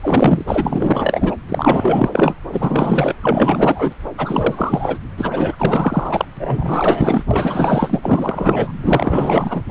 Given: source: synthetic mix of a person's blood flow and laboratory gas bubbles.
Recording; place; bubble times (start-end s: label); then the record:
Doppler ultrasound of blood flow; subclavian vein
0.02-0.44 s: bubbles
0.47-1.36 s: bubbles
1.49-2.10 s: bubbles
2.12-2.35 s: bubbles
2.52-3.15 s: bubbles
3.22-3.94 s: bubbles
4.17-4.98 s: bubbles
5.17-6.25 s: bubbles
6.36-7.23 s: bubbles
7.30-8.71 s: bubbles
8.82-9.62 s: bubbles
From the record:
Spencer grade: 4 (maximum detectable bubble signal sounding continuously throughout systole and diastole of every cardiac period, and overriding the amplitude of the normal cardiac signals); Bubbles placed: anywhere in the cardiac cycle